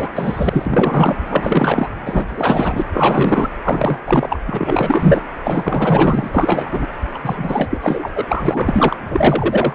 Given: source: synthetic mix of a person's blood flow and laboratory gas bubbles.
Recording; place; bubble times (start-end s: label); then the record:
Doppler ultrasound of blood flow; precordium
0.00-0.10 s: bubbles
0.15-1.16 s: bubbles
1.29-1.88 s: bubbles
2.06-2.83 s: bubbles
2.93-3.49 s: bubbles
3.64-3.99 s: bubbles
4.07-4.41 s: bubbles
4.46-5.21 s: bubbles
5.44-6.30 s: bubbles
6.33-6.87 s: bubbles
7.13-7.19 s: bubbles
7.22-8.09 s: bubbles
8.14-8.96 s: bubbles
9.10-9.75 s: bubbles
From the record:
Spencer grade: 4 (maximum detectable bubble signal sounding continuously throughout systole and diastole of every cardiac period, and overriding the amplitude of the normal cardiac signals); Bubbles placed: anywhere in the cardiac cycle